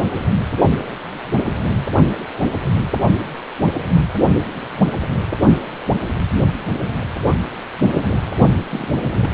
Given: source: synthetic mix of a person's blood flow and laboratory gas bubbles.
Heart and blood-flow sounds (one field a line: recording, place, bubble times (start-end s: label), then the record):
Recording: Doppler ultrasound of blood flow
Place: precordium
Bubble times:
8.69-8.96 s: bubbles
9.21-9.30 s: bubbles
From the record:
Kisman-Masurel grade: 111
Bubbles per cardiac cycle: 1 to 2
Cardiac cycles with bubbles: 1 to 10%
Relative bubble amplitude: barely perceptible (0.100 to 0.250)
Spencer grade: 1 (occasional bubble signal discernible with the cardiac motion signal, with majority of cardiac periods free of bubbles)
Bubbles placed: anywhere in the cardiac cycle